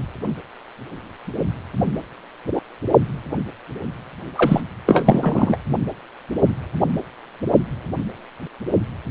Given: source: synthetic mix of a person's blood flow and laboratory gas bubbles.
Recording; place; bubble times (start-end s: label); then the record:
Doppler ultrasound of blood flow; precordium
4.36-4.62 s: bubbles
4.86-5.56 s: bubbles
From the record:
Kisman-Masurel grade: 213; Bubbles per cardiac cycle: several, 3 to 8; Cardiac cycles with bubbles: 1 to 10%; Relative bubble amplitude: loud (0.450 to 0.775); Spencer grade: 1 (occasional bubble signal discernible with the cardiac motion signal, with majority of cardiac periods free of bubbles); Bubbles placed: only in the low amplitude regions of the cardiac cycle